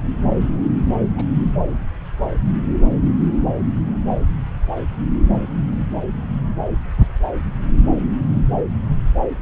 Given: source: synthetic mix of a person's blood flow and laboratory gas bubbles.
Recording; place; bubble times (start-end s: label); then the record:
Doppler ultrasound of blood flow; subclavian vein
0.98-1.05 s: bubbles
1.17-1.26 s: bubbles
From the record:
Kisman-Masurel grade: 111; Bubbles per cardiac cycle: 1 to 2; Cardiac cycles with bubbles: 1 to 10%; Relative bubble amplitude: barely perceptible (0.100 to 0.250); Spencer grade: 1 (occasional bubble signal discernible with the cardiac motion signal, with majority of cardiac periods free of bubbles); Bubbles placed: anywhere in the cardiac cycle